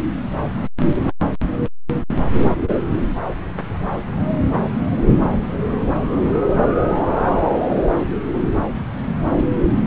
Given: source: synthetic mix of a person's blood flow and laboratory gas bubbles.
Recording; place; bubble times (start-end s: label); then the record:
Doppler ultrasound of blood flow; subclavian vein
no bubbles
From the record:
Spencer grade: 0 (complete lack of bubble signals)